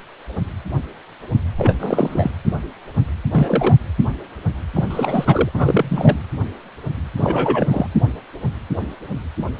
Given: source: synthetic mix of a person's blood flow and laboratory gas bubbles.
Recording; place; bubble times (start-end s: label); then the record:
Doppler ultrasound of blood flow; precordium
1.58-1.76 s: bubbles
1.79-2.31 s: bubbles
3.33-3.77 s: bubbles
4.74-5.49 s: bubbles
5.54-6.19 s: bubbles
7.17-7.87 s: bubbles
From the record:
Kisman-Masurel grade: 223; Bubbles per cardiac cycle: several, 3 to 8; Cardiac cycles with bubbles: 10 to 50%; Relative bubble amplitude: loud (0.450 to 0.775); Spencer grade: 2 (many but less than half of the cardiac periods contain bubble signals, singularly or in groups); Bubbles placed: anywhere in the cardiac cycle